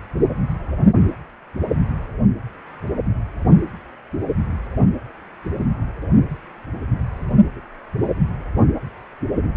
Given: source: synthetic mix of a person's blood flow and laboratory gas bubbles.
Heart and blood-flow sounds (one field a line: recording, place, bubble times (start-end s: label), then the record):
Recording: Doppler ultrasound of blood flow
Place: precordium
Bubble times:
no bubbles
From the record:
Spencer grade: 0 (complete lack of bubble signals)